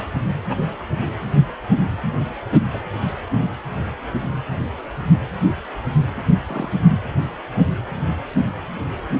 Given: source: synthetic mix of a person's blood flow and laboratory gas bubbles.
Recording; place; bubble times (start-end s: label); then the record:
Doppler ultrasound of blood flow; precordium
0.48-0.56 s: bubbles
2.73-2.81 s: bubbles
6.47-6.71 s: bubbles
6.88-7.00 s: bubbles
From the record:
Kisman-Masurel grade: 122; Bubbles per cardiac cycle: 1 to 2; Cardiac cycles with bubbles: 10 to 50%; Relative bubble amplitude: moderate (0.250 to 0.450); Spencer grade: 2 (many but less than half of the cardiac periods contain bubble signals, singularly or in groups); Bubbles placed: anywhere in the cardiac cycle